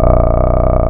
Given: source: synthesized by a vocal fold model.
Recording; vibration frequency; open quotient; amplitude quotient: sustained vowel; 30 Hz; 0.5; 1.3